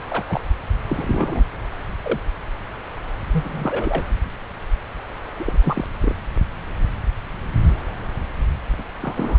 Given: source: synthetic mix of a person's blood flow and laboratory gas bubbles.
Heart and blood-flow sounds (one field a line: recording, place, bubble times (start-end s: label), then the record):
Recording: Doppler ultrasound of blood flow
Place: subclavian vein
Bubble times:
0.00-0.04 s: bubbles
0.08-0.25 s: bubbles
0.28-0.41 s: bubbles
0.86-1.44 s: bubbles
2.03-2.19 s: bubbles
3.32-4.04 s: bubbles
5.39-5.58 s: bubbles
5.64-5.88 s: bubbles
6.00-6.15 s: bubbles
8.78-8.84 s: bubbles
9.02-9.39 s: bubbles
From the record:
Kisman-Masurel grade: 221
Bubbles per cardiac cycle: several, 3 to 8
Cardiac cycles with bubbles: 10 to 50%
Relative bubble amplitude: barely perceptible (0.100 to 0.250)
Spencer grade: 2 (many but less than half of the cardiac periods contain bubble signals, singularly or in groups)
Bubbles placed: anywhere in the cardiac cycle